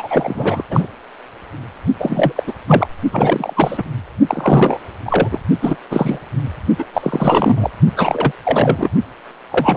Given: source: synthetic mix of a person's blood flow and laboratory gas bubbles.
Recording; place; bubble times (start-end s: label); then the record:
Doppler ultrasound of blood flow; precordium
0.00-0.63 s: bubbles
0.70-0.87 s: bubbles
1.98-2.33 s: bubbles
2.35-2.43 s: bubbles
2.46-2.53 s: bubbles
2.67-2.87 s: bubbles
3.12-3.54 s: bubbles
3.56-3.83 s: bubbles
4.27-4.78 s: bubbles
5.05-5.29 s: bubbles
5.32-5.39 s: bubbles
5.62-5.79 s: bubbles
5.91-6.19 s: bubbles
6.78-6.85 s: bubbles
6.94-7.71 s: bubbles
7.96-8.32 s: bubbles
8.45-8.89 s: bubbles
9.51-9.77 s: bubbles
From the record:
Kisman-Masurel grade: 343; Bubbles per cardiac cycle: rolling drumbeat, 9 or more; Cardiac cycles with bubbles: 100%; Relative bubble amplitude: loud (0.450 to 0.775); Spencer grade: 3 (all of the cardiac periods contain showers or single bubble signals, but not dominating or overriding the cardiac motion signals); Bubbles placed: only in the low amplitude regions of the cardiac cycle